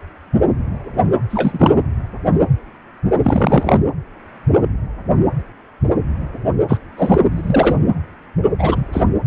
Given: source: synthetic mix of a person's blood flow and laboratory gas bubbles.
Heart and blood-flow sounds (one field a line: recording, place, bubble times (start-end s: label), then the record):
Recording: Doppler ultrasound of blood flow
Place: precordium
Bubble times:
1.29-1.84 s: bubbles
3.24-3.81 s: bubbles
6.68-6.78 s: bubbles
6.97-7.19 s: bubbles
7.31-7.77 s: bubbles
8.59-8.87 s: bubbles
8.92-9.02 s: bubbles
From the record:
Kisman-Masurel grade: 223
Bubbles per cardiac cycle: several, 3 to 8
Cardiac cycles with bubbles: 10 to 50%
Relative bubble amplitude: loud (0.450 to 0.775)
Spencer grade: 2 (many but less than half of the cardiac periods contain bubble signals, singularly or in groups)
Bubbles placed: anywhere in the cardiac cycle